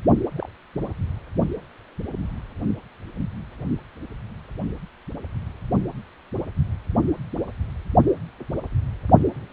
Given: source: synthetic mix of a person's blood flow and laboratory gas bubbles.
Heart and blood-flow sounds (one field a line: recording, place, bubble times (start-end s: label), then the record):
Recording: Doppler ultrasound of blood flow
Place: precordium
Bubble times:
0.35-0.49 s: bubbles
0.75-0.93 s: bubbles
From the record:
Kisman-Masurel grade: 111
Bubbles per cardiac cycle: 1 to 2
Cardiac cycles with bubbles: 1 to 10%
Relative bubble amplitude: barely perceptible (0.100 to 0.250)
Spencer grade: 1 (occasional bubble signal discernible with the cardiac motion signal, with majority of cardiac periods free of bubbles)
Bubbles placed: only in the low amplitude regions of the cardiac cycle